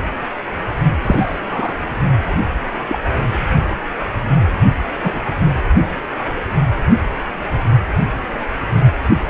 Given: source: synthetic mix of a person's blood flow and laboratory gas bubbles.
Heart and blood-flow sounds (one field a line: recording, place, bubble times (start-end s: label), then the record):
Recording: Doppler ultrasound of blood flow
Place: precordium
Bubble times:
1.02-1.40 s: bubbles
1.50-1.75 s: bubbles
2.88-2.99 s: bubbles
5.00-5.20 s: bubbles
From the record:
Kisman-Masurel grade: 122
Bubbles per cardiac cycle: 1 to 2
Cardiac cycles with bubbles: 10 to 50%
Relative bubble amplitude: moderate (0.250 to 0.450)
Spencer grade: 2 (many but less than half of the cardiac periods contain bubble signals, singularly or in groups)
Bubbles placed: only in the low amplitude regions of the cardiac cycle